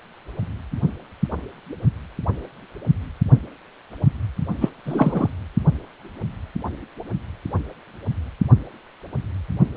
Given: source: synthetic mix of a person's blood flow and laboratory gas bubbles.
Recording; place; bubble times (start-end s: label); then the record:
Doppler ultrasound of blood flow; precordium
4.61-4.69 s: bubbles
4.85-5.29 s: bubbles
From the record:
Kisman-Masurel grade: 223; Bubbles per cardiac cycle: several, 3 to 8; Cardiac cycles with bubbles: 10 to 50%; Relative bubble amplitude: loud (0.450 to 0.775); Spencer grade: 2 (many but less than half of the cardiac periods contain bubble signals, singularly or in groups); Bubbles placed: only in the low amplitude regions of the cardiac cycle